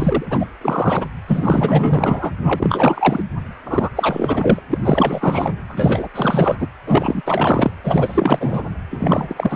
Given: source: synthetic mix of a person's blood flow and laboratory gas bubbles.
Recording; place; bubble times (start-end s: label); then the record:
Doppler ultrasound of blood flow; precordium
0.00-0.26 s: bubbles
0.30-0.47 s: bubbles
0.61-1.07 s: bubbles
1.27-2.31 s: bubbles
2.38-3.23 s: bubbles
3.65-3.90 s: bubbles
3.95-4.60 s: bubbles
4.70-4.79 s: bubbles
4.83-5.55 s: bubbles
5.68-6.08 s: bubbles
6.14-6.56 s: bubbles
6.59-6.68 s: bubbles
6.86-7.21 s: bubbles
7.25-7.71 s: bubbles
7.83-8.66 s: bubbles
8.91-9.56 s: bubbles
From the record:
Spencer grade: 4 (maximum detectable bubble signal sounding continuously throughout systole and diastole of every cardiac period, and overriding the amplitude of the normal cardiac signals); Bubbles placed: anywhere in the cardiac cycle